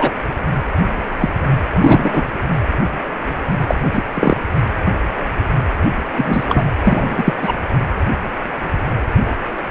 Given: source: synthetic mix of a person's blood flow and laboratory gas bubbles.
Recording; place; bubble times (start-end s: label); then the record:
Doppler ultrasound of blood flow; precordium
0.00-0.11 s: bubbles
1.20-1.29 s: bubbles
1.80-2.27 s: bubbles
3.67-3.79 s: bubbles
3.92-4.03 s: bubbles
4.14-4.37 s: bubbles
6.17-6.69 s: bubbles
6.84-7.33 s: bubbles
7.42-7.55 s: bubbles
From the record:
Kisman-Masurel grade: 223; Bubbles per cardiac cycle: several, 3 to 8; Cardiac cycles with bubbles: 10 to 50%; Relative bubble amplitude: loud (0.450 to 0.775); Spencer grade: 2 (many but less than half of the cardiac periods contain bubble signals, singularly or in groups); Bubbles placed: anywhere in the cardiac cycle